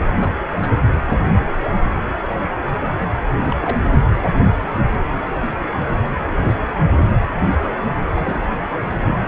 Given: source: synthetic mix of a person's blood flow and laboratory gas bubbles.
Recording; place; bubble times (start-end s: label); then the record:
Doppler ultrasound of blood flow; precordium
0.16-0.34 s: bubbles
0.52-0.70 s: bubbles
3.45-3.57 s: bubbles
3.61-3.79 s: bubbles
8.13-8.40 s: bubbles
9.01-9.18 s: bubbles
9.21-9.26 s: bubbles
From the record:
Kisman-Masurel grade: 221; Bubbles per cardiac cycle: several, 3 to 8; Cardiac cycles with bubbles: 10 to 50%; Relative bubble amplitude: barely perceptible (0.100 to 0.250); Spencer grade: 2 (many but less than half of the cardiac periods contain bubble signals, singularly or in groups); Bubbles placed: anywhere in the cardiac cycle